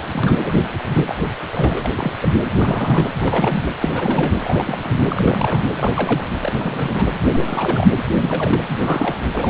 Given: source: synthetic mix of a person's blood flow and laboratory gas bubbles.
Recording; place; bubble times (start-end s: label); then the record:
Doppler ultrasound of blood flow; precordium
0.00-0.03 s: bubbles
0.10-0.53 s: bubbles
0.89-1.15 s: bubbles
1.51-1.89 s: bubbles
1.97-2.12 s: bubbles
2.22-2.29 s: bubbles
2.53-3.06 s: bubbles
3.20-3.66 s: bubbles
3.81-4.33 s: bubbles
4.41-4.79 s: bubbles
4.84-4.88 s: bubbles
5.09-5.65 s: bubbles
5.73-6.28 s: bubbles
6.39-7.05 s: bubbles
7.32-7.98 s: bubbles
8.18-8.62 s: bubbles
8.69-8.75 s: bubbles
8.79-9.21 s: bubbles
9.33-9.50 s: bubbles
From the record:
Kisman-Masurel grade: 332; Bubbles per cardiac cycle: rolling drumbeat, 9 or more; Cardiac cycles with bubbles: 50 to 99%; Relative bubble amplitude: moderate (0.250 to 0.450); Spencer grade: 3 (all of the cardiac periods contain showers or single bubble signals, but not dominating or overriding the cardiac motion signals); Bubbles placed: anywhere in the cardiac cycle